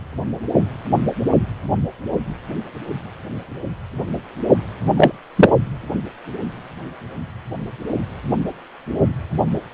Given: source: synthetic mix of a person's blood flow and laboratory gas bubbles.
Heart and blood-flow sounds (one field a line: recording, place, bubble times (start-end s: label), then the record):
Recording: Doppler ultrasound of blood flow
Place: precordium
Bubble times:
4.97-5.12 s: bubbles
5.35-5.50 s: bubbles
From the record:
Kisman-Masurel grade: 213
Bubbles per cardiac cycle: several, 3 to 8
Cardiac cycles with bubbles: 1 to 10%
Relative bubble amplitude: loud (0.450 to 0.775)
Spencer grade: 1 (occasional bubble signal discernible with the cardiac motion signal, with majority of cardiac periods free of bubbles)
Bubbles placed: only in the low amplitude regions of the cardiac cycle